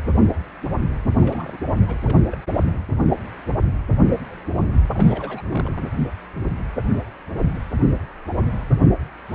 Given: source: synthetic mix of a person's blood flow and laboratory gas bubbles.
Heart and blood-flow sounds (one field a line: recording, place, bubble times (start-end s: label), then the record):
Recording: Doppler ultrasound of blood flow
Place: precordium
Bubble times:
1.21-1.57 s: bubbles
1.73-1.97 s: bubbles
2.04-2.21 s: bubbles
2.31-2.40 s: bubbles
4.93-5.42 s: bubbles
5.48-5.82 s: bubbles
From the record:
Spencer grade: 2 (many but less than half of the cardiac periods contain bubble signals, singularly or in groups)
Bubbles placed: anywhere in the cardiac cycle